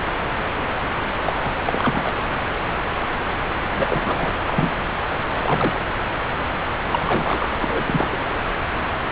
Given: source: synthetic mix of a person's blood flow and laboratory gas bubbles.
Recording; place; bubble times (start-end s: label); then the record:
Doppler ultrasound of blood flow; subclavian vein
1.16-1.34 s: bubbles
1.44-1.53 s: bubbles
1.67-2.12 s: bubbles
3.75-3.87 s: bubbles
3.89-4.31 s: bubbles
4.47-4.71 s: bubbles
5.29-5.83 s: bubbles
6.92-7.53 s: bubbles
7.59-8.08 s: bubbles
8.12-8.17 s: bubbles
From the record:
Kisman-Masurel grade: 222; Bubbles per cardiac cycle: several, 3 to 8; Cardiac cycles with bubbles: 10 to 50%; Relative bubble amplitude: moderate (0.250 to 0.450); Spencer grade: 2 (many but less than half of the cardiac periods contain bubble signals, singularly or in groups); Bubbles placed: anywhere in the cardiac cycle